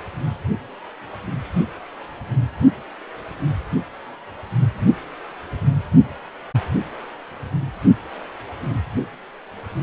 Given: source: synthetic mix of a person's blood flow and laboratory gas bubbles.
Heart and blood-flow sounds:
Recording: Doppler ultrasound of blood flow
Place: precordium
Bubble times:
no bubbles
From the record:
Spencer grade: 0 (complete lack of bubble signals)

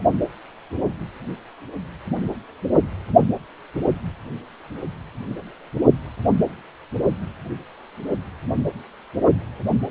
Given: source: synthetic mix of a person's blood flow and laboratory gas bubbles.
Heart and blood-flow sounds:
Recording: Doppler ultrasound of blood flow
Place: precordium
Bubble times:
no bubbles
From the record:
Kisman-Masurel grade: 000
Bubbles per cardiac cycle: 0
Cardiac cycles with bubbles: 0%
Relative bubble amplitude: no bubbles discernible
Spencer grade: 0 (complete lack of bubble signals)

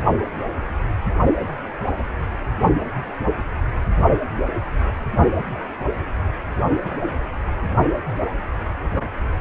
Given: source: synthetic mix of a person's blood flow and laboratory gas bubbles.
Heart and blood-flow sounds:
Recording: Doppler ultrasound of blood flow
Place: precordium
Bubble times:
6.84-6.99 s: bubbles
From the record:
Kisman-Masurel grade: 111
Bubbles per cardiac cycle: 1 to 2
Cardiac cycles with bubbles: 1 to 10%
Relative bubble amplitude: barely perceptible (0.100 to 0.250)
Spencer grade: 1 (occasional bubble signal discernible with the cardiac motion signal, with majority of cardiac periods free of bubbles)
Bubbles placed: only in the low amplitude regions of the cardiac cycle

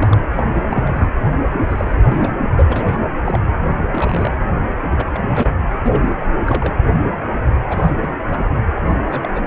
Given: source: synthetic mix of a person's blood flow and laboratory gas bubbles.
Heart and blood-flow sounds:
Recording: Doppler ultrasound of blood flow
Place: precordium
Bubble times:
0.00-0.18 s: bubbles
0.35-0.43 s: bubbles
0.52-1.10 s: bubbles
1.34-1.96 s: bubbles
2.04-2.33 s: bubbles
2.53-3.00 s: bubbles
3.25-3.39 s: bubbles
3.70-3.72 s: bubbles
3.77-3.85 s: bubbles
3.91-4.31 s: bubbles
4.91-5.05 s: bubbles
5.12-5.53 s: bubbles
5.83-6.16 s: bubbles
6.19-6.26 s: bubbles
6.46-6.75 s: bubbles
7.70-7.94 s: bubbles
8.00-8.09 s: bubbles
8.26-8.52 s: bubbles
8.86-8.96 s: bubbles
9.05-9.40 s: bubbles
From the record:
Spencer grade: 3 (all of the cardiac periods contain showers or single bubble signals, but not dominating or overriding the cardiac motion signals)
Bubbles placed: anywhere in the cardiac cycle

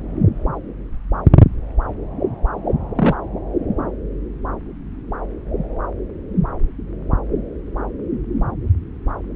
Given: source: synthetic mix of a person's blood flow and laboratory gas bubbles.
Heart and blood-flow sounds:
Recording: Doppler ultrasound of blood flow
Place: subclavian vein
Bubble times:
2.96-3.15 s: bubbles
From the record:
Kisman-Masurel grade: 113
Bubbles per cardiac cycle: 1 to 2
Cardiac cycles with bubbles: 1 to 10%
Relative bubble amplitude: loud (0.450 to 0.775)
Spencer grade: 1 (occasional bubble signal discernible with the cardiac motion signal, with majority of cardiac periods free of bubbles)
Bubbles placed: anywhere in the cardiac cycle

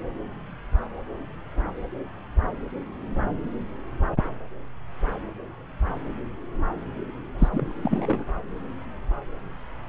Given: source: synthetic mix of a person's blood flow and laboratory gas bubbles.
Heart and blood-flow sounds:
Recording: Doppler ultrasound of blood flow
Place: subclavian vein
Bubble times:
7.38-7.49 s: bubbles
7.52-7.66 s: bubbles
7.83-8.26 s: bubbles
From the record:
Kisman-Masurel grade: 211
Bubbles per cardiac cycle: several, 3 to 8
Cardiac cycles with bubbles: 1 to 10%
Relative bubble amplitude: barely perceptible (0.100 to 0.250)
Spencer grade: 1 (occasional bubble signal discernible with the cardiac motion signal, with majority of cardiac periods free of bubbles)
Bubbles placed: anywhere in the cardiac cycle

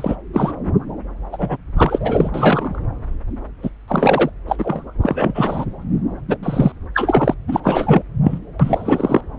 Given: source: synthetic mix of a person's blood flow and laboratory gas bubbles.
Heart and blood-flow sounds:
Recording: Doppler ultrasound of blood flow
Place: subclavian vein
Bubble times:
0.00-0.16 s: bubbles
0.33-0.53 s: bubbles
1.32-1.57 s: bubbles
1.77-2.31 s: bubbles
2.34-2.82 s: bubbles
3.62-3.70 s: bubbles
3.88-4.29 s: bubbles
4.47-4.88 s: bubbles
5.01-5.65 s: bubbles
6.28-6.37 s: bubbles
6.42-6.72 s: bubbles
6.94-7.34 s: bubbles
7.47-7.60 s: bubbles
7.63-8.02 s: bubbles
8.24-8.38 s: bubbles
8.60-9.21 s: bubbles
From the record:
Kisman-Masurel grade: 343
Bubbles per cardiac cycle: rolling drumbeat, 9 or more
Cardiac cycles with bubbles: 100%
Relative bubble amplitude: loud (0.450 to 0.775)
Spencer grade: 3 (all of the cardiac periods contain showers or single bubble signals, but not dominating or overriding the cardiac motion signals)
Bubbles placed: anywhere in the cardiac cycle

